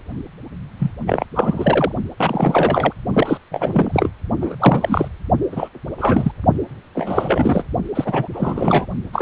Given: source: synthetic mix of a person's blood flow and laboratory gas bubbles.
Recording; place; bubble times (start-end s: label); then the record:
Doppler ultrasound of blood flow; precordium
0.79-0.92 s: bubbles
1.07-1.25 s: bubbles
1.35-1.93 s: bubbles
2.19-2.93 s: bubbles
3.13-3.38 s: bubbles
3.51-4.10 s: bubbles
4.41-4.55 s: bubbles
4.60-5.08 s: bubbles
5.52-5.68 s: bubbles
5.98-6.31 s: bubbles
6.95-7.63 s: bubbles
7.94-8.28 s: bubbles
8.33-8.86 s: bubbles
9.12-9.22 s: bubbles
From the record:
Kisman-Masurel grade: 343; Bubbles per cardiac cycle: rolling drumbeat, 9 or more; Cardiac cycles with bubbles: 100%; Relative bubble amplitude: loud (0.450 to 0.775); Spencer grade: 3 (all of the cardiac periods contain showers or single bubble signals, but not dominating or overriding the cardiac motion signals); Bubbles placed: only in the low amplitude regions of the cardiac cycle